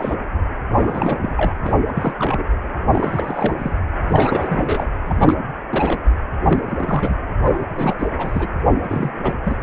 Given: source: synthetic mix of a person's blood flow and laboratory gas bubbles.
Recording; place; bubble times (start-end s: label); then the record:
Doppler ultrasound of blood flow; precordium
0.00-0.15 s: bubbles
0.71-1.56 s: bubbles
1.62-1.74 s: bubbles
1.87-2.15 s: bubbles
2.19-2.44 s: bubbles
2.92-3.77 s: bubbles
4.07-4.87 s: bubbles
5.06-5.35 s: bubbles
5.72-6.10 s: bubbles
6.45-7.14 s: bubbles
7.41-7.95 s: bubbles
7.99-8.07 s: bubbles
8.17-8.47 s: bubbles
8.60-8.62 s: bubbles
8.83-9.11 s: bubbles
9.23-9.33 s: bubbles
9.45-9.55 s: bubbles
From the record:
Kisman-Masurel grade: 332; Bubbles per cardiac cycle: rolling drumbeat, 9 or more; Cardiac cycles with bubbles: 50 to 99%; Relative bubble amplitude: moderate (0.250 to 0.450); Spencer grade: 3 (all of the cardiac periods contain showers or single bubble signals, but not dominating or overriding the cardiac motion signals); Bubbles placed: anywhere in the cardiac cycle